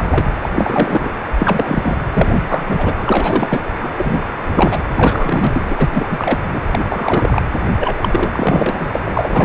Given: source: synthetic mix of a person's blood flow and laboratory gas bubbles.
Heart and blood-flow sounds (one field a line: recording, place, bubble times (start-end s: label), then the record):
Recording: Doppler ultrasound of blood flow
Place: precordium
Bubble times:
0.00-0.33 s: bubbles
0.42-0.49 s: bubbles
0.55-1.10 s: bubbles
1.39-1.98 s: bubbles
2.13-2.40 s: bubbles
2.47-3.62 s: bubbles
3.80-3.90 s: bubbles
3.96-4.24 s: bubbles
4.51-4.78 s: bubbles
4.96-5.89 s: bubbles
5.94-6.07 s: bubbles
6.11-6.38 s: bubbles
6.47-6.59 s: bubbles
6.71-6.85 s: bubbles
6.90-7.43 s: bubbles
7.77-7.99 s: bubbles
8.01-8.85 s: bubbles
8.93-9.00 s: bubbles
9.04-9.45 s: bubbles
From the record:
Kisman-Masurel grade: 343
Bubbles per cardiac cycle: rolling drumbeat, 9 or more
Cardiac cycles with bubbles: 100%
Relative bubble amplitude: loud (0.450 to 0.775)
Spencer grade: 3 (all of the cardiac periods contain showers or single bubble signals, but not dominating or overriding the cardiac motion signals)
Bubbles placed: anywhere in the cardiac cycle